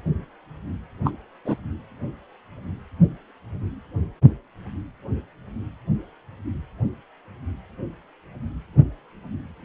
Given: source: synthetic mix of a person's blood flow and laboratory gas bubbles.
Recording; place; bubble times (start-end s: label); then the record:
Doppler ultrasound of blood flow; precordium
1.04-1.11 s: bubbles
1.44-1.56 s: bubbles
From the record:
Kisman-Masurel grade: 112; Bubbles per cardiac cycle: 1 to 2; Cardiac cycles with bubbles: 1 to 10%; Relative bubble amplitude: moderate (0.250 to 0.450); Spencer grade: 1 (occasional bubble signal discernible with the cardiac motion signal, with majority of cardiac periods free of bubbles); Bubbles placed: anywhere in the cardiac cycle